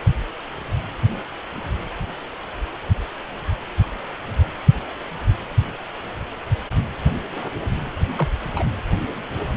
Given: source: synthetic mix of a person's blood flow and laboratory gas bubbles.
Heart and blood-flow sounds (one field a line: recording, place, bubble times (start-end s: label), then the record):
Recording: Doppler ultrasound of blood flow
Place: precordium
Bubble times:
8.18-8.28 s: bubbles
8.56-8.63 s: bubbles
From the record:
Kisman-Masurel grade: 112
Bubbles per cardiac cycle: 1 to 2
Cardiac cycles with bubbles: 1 to 10%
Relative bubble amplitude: moderate (0.250 to 0.450)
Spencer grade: 1 (occasional bubble signal discernible with the cardiac motion signal, with majority of cardiac periods free of bubbles)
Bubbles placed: anywhere in the cardiac cycle